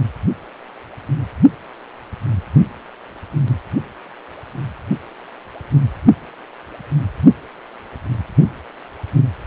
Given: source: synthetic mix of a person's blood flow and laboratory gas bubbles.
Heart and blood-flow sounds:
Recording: Doppler ultrasound of blood flow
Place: precordium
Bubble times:
no bubbles
From the record:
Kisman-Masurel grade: 000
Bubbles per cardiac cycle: 0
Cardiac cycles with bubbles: 0%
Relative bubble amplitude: no bubbles discernible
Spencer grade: 0 (complete lack of bubble signals)

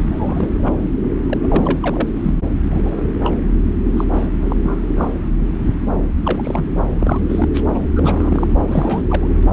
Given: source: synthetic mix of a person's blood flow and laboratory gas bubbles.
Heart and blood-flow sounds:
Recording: Doppler ultrasound of blood flow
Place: subclavian vein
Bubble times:
0.00-0.49 s: bubbles
0.58-0.80 s: bubbles
1.29-1.38 s: bubbles
1.41-1.79 s: bubbles
1.82-2.09 s: bubbles
2.22-2.34 s: bubbles
2.69-2.81 s: bubbles
2.84-3.01 s: bubbles
3.23-3.33 s: bubbles
3.97-4.04 s: bubbles
4.12-4.27 s: bubbles
4.40-4.56 s: bubbles
4.64-4.79 s: bubbles
4.96-5.14 s: bubbles
6.23-6.64 s: bubbles
6.99-7.21 s: bubbles
7.29-7.49 s: bubbles
7.54-7.67 s: bubbles
7.74-7.79 s: bubbles
7.96-8.47 s: bubbles
8.68-9.28 s: bubbles
From the record:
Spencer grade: 3 (all of the cardiac periods contain showers or single bubble signals, but not dominating or overriding the cardiac motion signals)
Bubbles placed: anywhere in the cardiac cycle

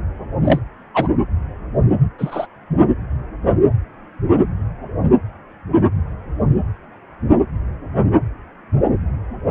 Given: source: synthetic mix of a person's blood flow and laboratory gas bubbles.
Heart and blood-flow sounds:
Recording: Doppler ultrasound of blood flow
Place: precordium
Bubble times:
0.44-0.59 s: bubbles
0.94-1.08 s: bubbles
2.19-2.46 s: bubbles
From the record:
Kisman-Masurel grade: 123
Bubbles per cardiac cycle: 1 to 2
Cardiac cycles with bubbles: 10 to 50%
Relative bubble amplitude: loud (0.450 to 0.775)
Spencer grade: 2 (many but less than half of the cardiac periods contain bubble signals, singularly or in groups)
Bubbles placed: anywhere in the cardiac cycle

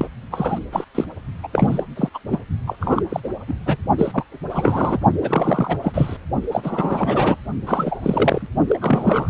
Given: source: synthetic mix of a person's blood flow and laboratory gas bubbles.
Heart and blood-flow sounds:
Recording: Doppler ultrasound of blood flow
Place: precordium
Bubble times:
0.00-0.08 s: bubbles
0.31-0.59 s: bubbles
0.71-0.85 s: bubbles
0.94-1.04 s: bubbles
1.43-1.48 s: bubbles
1.52-1.83 s: bubbles
1.96-2.08 s: bubbles
2.14-2.19 s: bubbles
2.30-2.39 s: bubbles
2.67-2.76 s: bubbles
2.79-3.02 s: bubbles
3.09-3.20 s: bubbles
3.23-3.29 s: bubbles
3.47-3.54 s: bubbles
3.66-3.77 s: bubbles
3.98-4.24 s: bubbles
4.49-4.98 s: bubbles
5.21-5.77 s: bubbles
5.82-6.17 s: bubbles
6.51-7.39 s: bubbles
7.66-8.46 s: bubbles
8.68-8.78 s: bubbles
8.81-9.30 s: bubbles
From the record:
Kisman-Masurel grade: 343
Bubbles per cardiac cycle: rolling drumbeat, 9 or more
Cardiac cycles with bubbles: 100%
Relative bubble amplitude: loud (0.450 to 0.775)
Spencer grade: 3 (all of the cardiac periods contain showers or single bubble signals, but not dominating or overriding the cardiac motion signals)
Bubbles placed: only in the low amplitude regions of the cardiac cycle

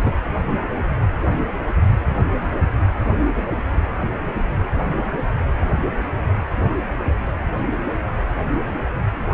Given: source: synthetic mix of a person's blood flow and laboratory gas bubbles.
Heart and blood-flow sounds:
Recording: Doppler ultrasound of blood flow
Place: precordium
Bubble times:
0.00-0.11 s: bubbles
From the record:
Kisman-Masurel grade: 212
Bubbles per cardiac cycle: several, 3 to 8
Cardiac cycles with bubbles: 1 to 10%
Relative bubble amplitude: moderate (0.250 to 0.450)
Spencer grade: 1 (occasional bubble signal discernible with the cardiac motion signal, with majority of cardiac periods free of bubbles)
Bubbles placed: anywhere in the cardiac cycle

